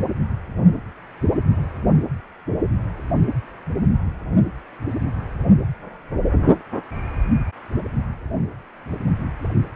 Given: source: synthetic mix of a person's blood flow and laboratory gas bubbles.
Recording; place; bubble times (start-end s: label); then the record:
Doppler ultrasound of blood flow; precordium
no bubbles
From the record:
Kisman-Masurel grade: 000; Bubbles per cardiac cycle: 0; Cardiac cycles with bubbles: 0%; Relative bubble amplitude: no bubbles discernible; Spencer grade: 0 (complete lack of bubble signals)